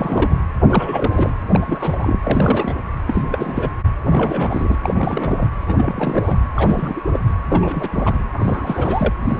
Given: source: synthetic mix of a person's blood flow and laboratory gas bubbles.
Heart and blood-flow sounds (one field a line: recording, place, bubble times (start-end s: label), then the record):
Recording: Doppler ultrasound of blood flow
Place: precordium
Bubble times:
0.00-0.36 s: bubbles
0.68-1.31 s: bubbles
1.51-2.18 s: bubbles
2.23-2.73 s: bubbles
3.07-3.70 s: bubbles
4.06-4.78 s: bubbles
4.84-5.48 s: bubbles
5.67-6.38 s: bubbles
6.54-7.02 s: bubbles
7.12-7.20 s: bubbles
7.51-7.89 s: bubbles
7.92-8.19 s: bubbles
8.33-9.13 s: bubbles
9.28-9.40 s: bubbles
From the record:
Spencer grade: 3 (all of the cardiac periods contain showers or single bubble signals, but not dominating or overriding the cardiac motion signals)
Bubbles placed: anywhere in the cardiac cycle